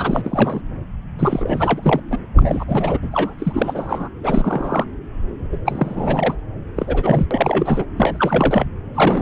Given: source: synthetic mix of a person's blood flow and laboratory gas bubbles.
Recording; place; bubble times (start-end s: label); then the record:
Doppler ultrasound of blood flow; subclavian vein
0.00-0.62 s: bubbles
1.19-2.01 s: bubbles
2.10-2.18 s: bubbles
2.35-2.64 s: bubbles
2.68-2.99 s: bubbles
3.02-3.34 s: bubbles
3.39-4.08 s: bubbles
4.23-4.85 s: bubbles
5.52-5.57 s: bubbles
5.65-6.34 s: bubbles
6.76-7.27 s: bubbles
7.31-7.85 s: bubbles
7.97-8.66 s: bubbles
8.94-9.22 s: bubbles
From the record:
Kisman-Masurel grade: 342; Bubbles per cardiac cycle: rolling drumbeat, 9 or more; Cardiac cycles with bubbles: 100%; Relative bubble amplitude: moderate (0.250 to 0.450); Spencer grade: 3 (all of the cardiac periods contain showers or single bubble signals, but not dominating or overriding the cardiac motion signals); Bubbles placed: anywhere in the cardiac cycle